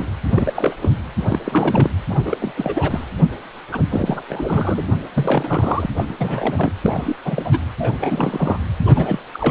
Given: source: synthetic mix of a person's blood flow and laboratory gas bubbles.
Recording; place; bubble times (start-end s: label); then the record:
Doppler ultrasound of blood flow; precordium
0.00-0.05 s: bubbles
0.30-0.76 s: bubbles
0.82-0.91 s: bubbles
1.18-1.38 s: bubbles
1.45-1.90 s: bubbles
2.09-2.20 s: bubbles
2.25-2.38 s: bubbles
2.40-2.52 s: bubbles
2.56-3.04 s: bubbles
3.71-3.80 s: bubbles
3.89-4.22 s: bubbles
4.29-4.95 s: bubbles
5.13-5.86 s: bubbles
5.96-6.14 s: bubbles
6.17-6.71 s: bubbles
6.84-7.16 s: bubbles
7.24-7.49 s: bubbles
7.51-7.59 s: bubbles
7.79-8.59 s: bubbles
8.86-9.19 s: bubbles
9.33-9.51 s: bubbles
From the record:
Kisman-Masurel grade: 342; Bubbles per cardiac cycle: rolling drumbeat, 9 or more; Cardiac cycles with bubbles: 100%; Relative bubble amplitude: moderate (0.250 to 0.450); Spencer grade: 3 (all of the cardiac periods contain showers or single bubble signals, but not dominating or overriding the cardiac motion signals); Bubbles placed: anywhere in the cardiac cycle